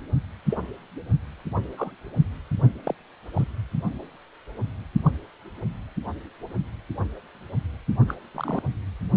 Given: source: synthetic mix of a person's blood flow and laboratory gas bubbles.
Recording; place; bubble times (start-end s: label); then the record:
Doppler ultrasound of blood flow; precordium
0.51-0.57 s: bubbles
1.77-1.92 s: bubbles
2.83-2.94 s: bubbles
3.34-3.44 s: bubbles
5.03-5.10 s: bubbles
8.08-8.15 s: bubbles
8.35-8.62 s: bubbles
From the record:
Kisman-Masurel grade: 121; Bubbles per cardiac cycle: 1 to 2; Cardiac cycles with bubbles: 10 to 50%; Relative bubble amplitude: barely perceptible (0.100 to 0.250); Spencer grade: 2 (many but less than half of the cardiac periods contain bubble signals, singularly or in groups); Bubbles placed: only in the low amplitude regions of the cardiac cycle